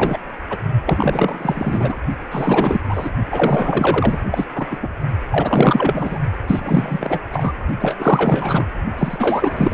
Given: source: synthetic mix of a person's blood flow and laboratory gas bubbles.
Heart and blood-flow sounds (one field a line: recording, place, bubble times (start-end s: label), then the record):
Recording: Doppler ultrasound of blood flow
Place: precordium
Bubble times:
0.00-0.20 s: bubbles
0.49-0.59 s: bubbles
0.86-1.96 s: bubbles
2.31-2.80 s: bubbles
2.83-3.10 s: bubbles
3.29-4.28 s: bubbles
4.32-4.46 s: bubbles
4.55-4.66 s: bubbles
4.71-4.77 s: bubbles
4.82-4.89 s: bubbles
5.30-6.18 s: bubbles
6.47-7.18 s: bubbles
7.29-7.52 s: bubbles
7.80-8.66 s: bubbles
8.97-9.74 s: bubbles
From the record:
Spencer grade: 4 (maximum detectable bubble signal sounding continuously throughout systole and diastole of every cardiac period, and overriding the amplitude of the normal cardiac signals)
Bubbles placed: only in the low amplitude regions of the cardiac cycle